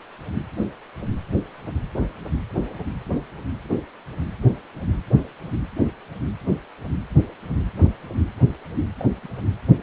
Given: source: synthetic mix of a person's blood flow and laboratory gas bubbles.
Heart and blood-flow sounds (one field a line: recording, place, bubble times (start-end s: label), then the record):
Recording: Doppler ultrasound of blood flow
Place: precordium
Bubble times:
8.97-9.05 s: bubbles
9.22-9.34 s: bubbles
From the record:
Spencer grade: 1 (occasional bubble signal discernible with the cardiac motion signal, with majority of cardiac periods free of bubbles)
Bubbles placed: anywhere in the cardiac cycle